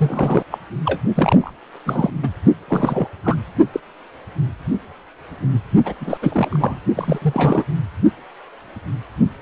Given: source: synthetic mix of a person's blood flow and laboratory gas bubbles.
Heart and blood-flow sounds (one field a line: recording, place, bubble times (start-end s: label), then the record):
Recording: Doppler ultrasound of blood flow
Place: precordium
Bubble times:
0.00-0.43 s: bubbles
0.51-0.58 s: bubbles
0.85-1.00 s: bubbles
1.15-1.53 s: bubbles
1.85-2.11 s: bubbles
2.23-2.29 s: bubbles
2.68-3.08 s: bubbles
3.23-3.36 s: bubbles
3.73-3.80 s: bubbles
5.85-5.95 s: bubbles
6.00-6.18 s: bubbles
6.22-6.80 s: bubbles
6.95-7.19 s: bubbles
7.22-7.64 s: bubbles
From the record:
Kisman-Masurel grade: 332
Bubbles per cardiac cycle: rolling drumbeat, 9 or more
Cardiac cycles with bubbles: 50 to 99%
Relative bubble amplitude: moderate (0.250 to 0.450)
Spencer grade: 3 (all of the cardiac periods contain showers or single bubble signals, but not dominating or overriding the cardiac motion signals)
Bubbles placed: only in the low amplitude regions of the cardiac cycle